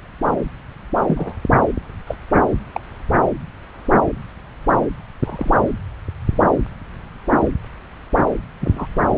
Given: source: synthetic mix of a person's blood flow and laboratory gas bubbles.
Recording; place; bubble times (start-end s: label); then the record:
Doppler ultrasound of blood flow; subclavian vein
1.07-1.36 s: bubbles
2.07-2.16 s: bubbles
2.74-2.80 s: bubbles
5.22-5.62 s: bubbles
8.60-8.87 s: bubbles
9.16-9.18 s: bubbles
From the record:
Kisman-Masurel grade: 122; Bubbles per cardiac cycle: 1 to 2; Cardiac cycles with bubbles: 10 to 50%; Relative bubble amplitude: moderate (0.250 to 0.450); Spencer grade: 2 (many but less than half of the cardiac periods contain bubble signals, singularly or in groups); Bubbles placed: anywhere in the cardiac cycle